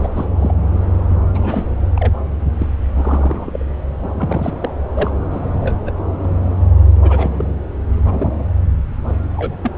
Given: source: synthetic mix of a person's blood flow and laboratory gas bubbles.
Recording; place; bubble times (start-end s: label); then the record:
Doppler ultrasound of blood flow; subclavian vein
0.00-0.08 s: bubbles
0.15-0.55 s: bubbles
1.09-1.16 s: bubbles
1.34-1.64 s: bubbles
1.95-2.12 s: bubbles
2.59-2.67 s: bubbles
2.94-3.66 s: bubbles
4.02-4.08 s: bubbles
4.15-4.57 s: bubbles
4.60-4.74 s: bubbles
4.95-5.11 s: bubbles
5.31-5.42 s: bubbles
5.60-5.91 s: bubbles
6.23-6.31 s: bubbles
7.02-7.31 s: bubbles
7.38-7.45 s: bubbles
8.06-8.32 s: bubbles
9.08-9.13 s: bubbles
9.36-9.55 s: bubbles
9.62-9.71 s: bubbles
From the record:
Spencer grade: 3 (all of the cardiac periods contain showers or single bubble signals, but not dominating or overriding the cardiac motion signals); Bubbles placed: anywhere in the cardiac cycle